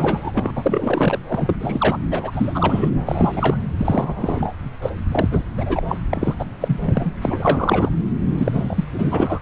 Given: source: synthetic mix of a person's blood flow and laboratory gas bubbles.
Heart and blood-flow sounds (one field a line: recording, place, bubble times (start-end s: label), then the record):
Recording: Doppler ultrasound of blood flow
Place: subclavian vein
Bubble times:
0.00-0.31 s: bubbles
0.35-0.51 s: bubbles
0.55-1.18 s: bubbles
1.28-1.55 s: bubbles
1.60-1.98 s: bubbles
2.10-2.90 s: bubbles
3.05-3.57 s: bubbles
3.77-4.53 s: bubbles
4.82-4.90 s: bubbles
5.12-5.45 s: bubbles
5.58-5.83 s: bubbles
5.88-5.98 s: bubbles
6.09-6.34 s: bubbles
6.39-6.45 s: bubbles
6.60-6.80 s: bubbles
6.85-7.12 s: bubbles
7.21-7.90 s: bubbles
8.37-8.85 s: bubbles
8.92-9.39 s: bubbles
From the record:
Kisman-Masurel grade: 342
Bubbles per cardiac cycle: rolling drumbeat, 9 or more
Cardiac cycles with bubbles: 100%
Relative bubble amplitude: moderate (0.250 to 0.450)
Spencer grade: 3 (all of the cardiac periods contain showers or single bubble signals, but not dominating or overriding the cardiac motion signals)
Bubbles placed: anywhere in the cardiac cycle